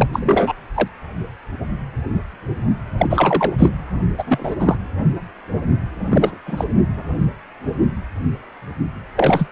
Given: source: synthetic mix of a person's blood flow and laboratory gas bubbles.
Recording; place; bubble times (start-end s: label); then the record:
Doppler ultrasound of blood flow; precordium
0.00-0.08 s: bubbles
0.12-0.53 s: bubbles
0.74-0.88 s: bubbles
2.98-3.70 s: bubbles
4.17-4.54 s: bubbles
4.59-4.75 s: bubbles
6.09-6.38 s: bubbles
6.46-6.64 s: bubbles
9.15-9.48 s: bubbles
From the record:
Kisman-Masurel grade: 233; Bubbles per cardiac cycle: several, 3 to 8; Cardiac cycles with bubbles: 50 to 99%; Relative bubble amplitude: loud (0.450 to 0.775); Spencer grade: 3 (all of the cardiac periods contain showers or single bubble signals, but not dominating or overriding the cardiac motion signals); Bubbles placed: anywhere in the cardiac cycle